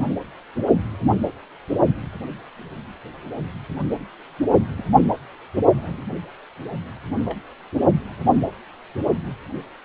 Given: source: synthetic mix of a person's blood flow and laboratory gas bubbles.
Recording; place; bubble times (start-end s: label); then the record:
Doppler ultrasound of blood flow; precordium
0.00-0.14 s: bubbles
4.77-4.83 s: bubbles
5.04-5.10 s: bubbles
5.78-6.02 s: bubbles
7.26-7.39 s: bubbles
From the record:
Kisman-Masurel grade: 121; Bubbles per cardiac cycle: 1 to 2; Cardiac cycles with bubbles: 10 to 50%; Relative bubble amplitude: barely perceptible (0.100 to 0.250); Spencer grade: 2 (many but less than half of the cardiac periods contain bubble signals, singularly or in groups); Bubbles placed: only in the low amplitude regions of the cardiac cycle